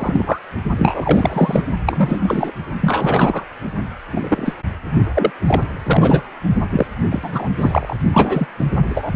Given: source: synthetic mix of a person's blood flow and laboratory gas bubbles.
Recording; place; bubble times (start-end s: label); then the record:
Doppler ultrasound of blood flow; precordium
0.00-0.41 s: bubbles
0.78-1.62 s: bubbles
1.86-2.54 s: bubbles
2.79-3.45 s: bubbles
4.11-4.55 s: bubbles
5.15-5.31 s: bubbles
5.47-5.64 s: bubbles
5.84-6.22 s: bubbles
6.70-6.86 s: bubbles
7.10-7.50 s: bubbles
7.58-7.96 s: bubbles
8.13-8.47 s: bubbles
8.58-8.65 s: bubbles
8.88-9.11 s: bubbles
From the record:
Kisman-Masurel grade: 243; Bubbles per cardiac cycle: several, 3 to 8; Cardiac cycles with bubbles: 100%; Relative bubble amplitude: loud (0.450 to 0.775); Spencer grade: 3 (all of the cardiac periods contain showers or single bubble signals, but not dominating or overriding the cardiac motion signals); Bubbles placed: only in the low amplitude regions of the cardiac cycle